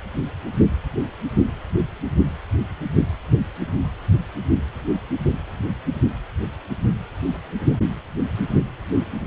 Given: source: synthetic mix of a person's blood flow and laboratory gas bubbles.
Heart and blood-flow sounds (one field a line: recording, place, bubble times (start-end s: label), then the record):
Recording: Doppler ultrasound of blood flow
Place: precordium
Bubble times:
no bubbles
From the record:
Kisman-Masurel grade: 000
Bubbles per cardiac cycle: 0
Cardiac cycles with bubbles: 0%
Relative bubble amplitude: no bubbles discernible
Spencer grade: 0 (complete lack of bubble signals)